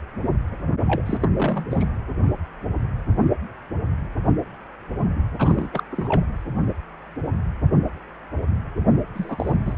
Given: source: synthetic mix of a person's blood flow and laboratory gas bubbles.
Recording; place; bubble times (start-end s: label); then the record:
Doppler ultrasound of blood flow; precordium
0.87-1.03 s: bubbles
1.05-1.18 s: bubbles
1.20-1.28 s: bubbles
1.36-1.65 s: bubbles
1.71-1.85 s: bubbles
5.38-5.69 s: bubbles
5.72-5.83 s: bubbles
5.91-6.25 s: bubbles
9.15-9.55 s: bubbles
9.66-9.76 s: bubbles
From the record:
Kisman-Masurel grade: 221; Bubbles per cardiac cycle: several, 3 to 8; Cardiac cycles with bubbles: 10 to 50%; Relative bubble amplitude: barely perceptible (0.100 to 0.250); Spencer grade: 2 (many but less than half of the cardiac periods contain bubble signals, singularly or in groups); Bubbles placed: anywhere in the cardiac cycle